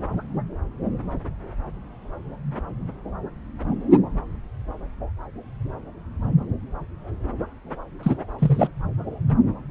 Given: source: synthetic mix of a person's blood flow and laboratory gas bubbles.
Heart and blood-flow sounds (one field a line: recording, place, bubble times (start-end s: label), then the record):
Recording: Doppler ultrasound of blood flow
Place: subclavian vein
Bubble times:
8.02-8.17 s: bubbles
8.38-8.69 s: bubbles
From the record:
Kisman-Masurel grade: 223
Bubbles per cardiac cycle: several, 3 to 8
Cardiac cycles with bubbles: 10 to 50%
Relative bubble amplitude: loud (0.450 to 0.775)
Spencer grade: 2 (many but less than half of the cardiac periods contain bubble signals, singularly or in groups)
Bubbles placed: anywhere in the cardiac cycle